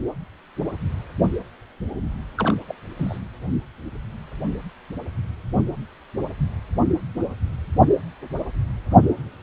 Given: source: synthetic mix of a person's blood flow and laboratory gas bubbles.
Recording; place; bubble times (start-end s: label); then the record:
Doppler ultrasound of blood flow; precordium
2.38-2.54 s: bubbles
2.68-2.75 s: bubbles
2.98-3.18 s: bubbles
From the record:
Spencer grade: 1 (occasional bubble signal discernible with the cardiac motion signal, with majority of cardiac periods free of bubbles); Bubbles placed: anywhere in the cardiac cycle